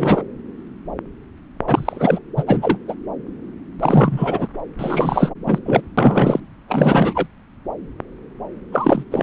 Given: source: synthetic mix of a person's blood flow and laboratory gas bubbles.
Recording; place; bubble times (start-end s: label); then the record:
Doppler ultrasound of blood flow; subclavian vein
0.00-0.22 s: bubbles
1.67-2.19 s: bubbles
2.36-2.43 s: bubbles
2.46-2.78 s: bubbles
2.88-2.94 s: bubbles
3.79-4.47 s: bubbles
4.79-5.31 s: bubbles
5.46-5.58 s: bubbles
5.66-5.81 s: bubbles
5.97-6.40 s: bubbles
6.68-7.28 s: bubbles
8.72-9.04 s: bubbles
9.11-9.23 s: bubbles
From the record:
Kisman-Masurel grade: 333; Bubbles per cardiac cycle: rolling drumbeat, 9 or more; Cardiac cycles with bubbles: 50 to 99%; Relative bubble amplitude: loud (0.450 to 0.775); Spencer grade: 3 (all of the cardiac periods contain showers or single bubble signals, but not dominating or overriding the cardiac motion signals); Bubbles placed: anywhere in the cardiac cycle